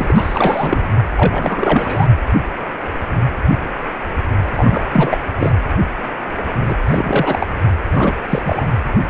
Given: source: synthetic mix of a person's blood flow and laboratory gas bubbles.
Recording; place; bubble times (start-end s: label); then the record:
Doppler ultrasound of blood flow; precordium
0.00-0.87 s: bubbles
1.16-2.07 s: bubbles
4.57-4.86 s: bubbles
4.92-5.18 s: bubbles
5.39-5.52 s: bubbles
6.68-6.75 s: bubbles
6.88-7.47 s: bubbles
7.92-8.15 s: bubbles
8.29-8.42 s: bubbles
8.45-8.65 s: bubbles
From the record:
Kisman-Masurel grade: 332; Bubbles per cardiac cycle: rolling drumbeat, 9 or more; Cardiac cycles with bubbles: 50 to 99%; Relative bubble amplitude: moderate (0.250 to 0.450); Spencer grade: 3 (all of the cardiac periods contain showers or single bubble signals, but not dominating or overriding the cardiac motion signals); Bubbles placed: anywhere in the cardiac cycle